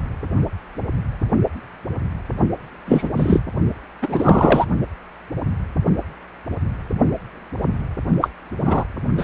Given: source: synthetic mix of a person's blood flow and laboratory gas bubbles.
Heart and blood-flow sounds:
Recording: Doppler ultrasound of blood flow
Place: precordium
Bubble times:
2.86-3.09 s: bubbles
3.17-3.40 s: bubbles
4.02-4.66 s: bubbles
8.21-8.29 s: bubbles
8.59-8.84 s: bubbles
9.17-9.24 s: bubbles
From the record:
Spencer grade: 2 (many but less than half of the cardiac periods contain bubble signals, singularly or in groups)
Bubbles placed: only in the low amplitude regions of the cardiac cycle

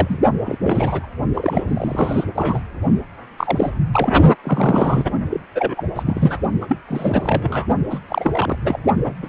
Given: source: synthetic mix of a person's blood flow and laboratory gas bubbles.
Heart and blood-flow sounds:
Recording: Doppler ultrasound of blood flow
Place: precordium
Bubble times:
0.00-0.18 s: bubbles
0.45-0.58 s: bubbles
0.63-1.08 s: bubbles
1.34-1.65 s: bubbles
1.68-2.24 s: bubbles
2.35-2.60 s: bubbles
3.38-3.71 s: bubbles
3.93-4.11 s: bubbles
4.43-5.04 s: bubbles
5.29-5.40 s: bubbles
5.54-5.83 s: bubbles
5.95-6.03 s: bubbles
6.05-6.39 s: bubbles
6.61-6.77 s: bubbles
6.88-7.67 s: bubbles
7.90-7.99 s: bubbles
8.08-8.56 s: bubbles
8.61-8.79 s: bubbles
9.04-9.13 s: bubbles
9.22-9.28 s: bubbles
From the record:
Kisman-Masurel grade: 342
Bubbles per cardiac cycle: rolling drumbeat, 9 or more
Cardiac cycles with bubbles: 100%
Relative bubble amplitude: moderate (0.250 to 0.450)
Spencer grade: 3 (all of the cardiac periods contain showers or single bubble signals, but not dominating or overriding the cardiac motion signals)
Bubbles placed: only in the low amplitude regions of the cardiac cycle

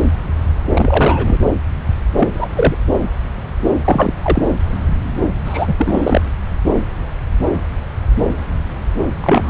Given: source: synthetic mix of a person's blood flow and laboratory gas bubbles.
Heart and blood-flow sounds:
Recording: Doppler ultrasound of blood flow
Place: subclavian vein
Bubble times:
0.73-1.39 s: bubbles
2.17-2.28 s: bubbles
2.33-2.48 s: bubbles
2.55-2.75 s: bubbles
3.85-4.13 s: bubbles
4.22-4.43 s: bubbles
5.46-5.75 s: bubbles
5.78-6.21 s: bubbles
9.20-9.50 s: bubbles
From the record:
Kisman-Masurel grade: 223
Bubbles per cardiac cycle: several, 3 to 8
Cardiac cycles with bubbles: 10 to 50%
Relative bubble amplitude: loud (0.450 to 0.775)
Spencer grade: 2 (many but less than half of the cardiac periods contain bubble signals, singularly or in groups)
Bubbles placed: anywhere in the cardiac cycle

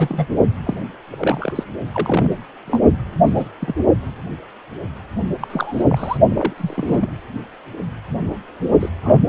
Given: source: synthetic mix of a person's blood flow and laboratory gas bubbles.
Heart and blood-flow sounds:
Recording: Doppler ultrasound of blood flow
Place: precordium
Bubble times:
0.00-0.27 s: bubbles
0.64-0.83 s: bubbles
1.11-1.64 s: bubbles
1.93-2.36 s: bubbles
2.68-2.79 s: bubbles
3.25-3.48 s: bubbles
3.60-3.74 s: bubbles
5.40-5.83 s: bubbles
5.89-6.17 s: bubbles
6.28-6.53 s: bubbles
6.57-7.09 s: bubbles
8.80-8.90 s: bubbles
9.03-9.20 s: bubbles
From the record:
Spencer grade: 3 (all of the cardiac periods contain showers or single bubble signals, but not dominating or overriding the cardiac motion signals)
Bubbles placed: only in the low amplitude regions of the cardiac cycle

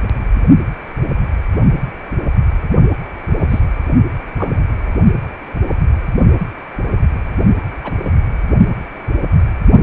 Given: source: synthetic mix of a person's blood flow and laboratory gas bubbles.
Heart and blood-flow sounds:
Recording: Doppler ultrasound of blood flow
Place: precordium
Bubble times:
3.39-3.60 s: bubbles
4.36-4.74 s: bubbles
5.68-5.73 s: bubbles
6.38-6.47 s: bubbles
7.83-7.96 s: bubbles
8.00-8.11 s: bubbles
From the record:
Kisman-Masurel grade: 122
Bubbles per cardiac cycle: 1 to 2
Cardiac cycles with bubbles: 10 to 50%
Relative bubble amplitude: moderate (0.250 to 0.450)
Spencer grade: 2 (many but less than half of the cardiac periods contain bubble signals, singularly or in groups)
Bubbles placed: only in the low amplitude regions of the cardiac cycle

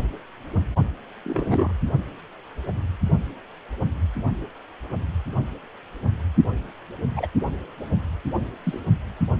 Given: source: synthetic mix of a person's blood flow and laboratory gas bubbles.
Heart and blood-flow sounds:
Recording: Doppler ultrasound of blood flow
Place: precordium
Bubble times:
1.25-1.72 s: bubbles
7.16-7.27 s: bubbles
8.63-8.80 s: bubbles
From the record:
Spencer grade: 2 (many but less than half of the cardiac periods contain bubble signals, singularly or in groups)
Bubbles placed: only in the low amplitude regions of the cardiac cycle

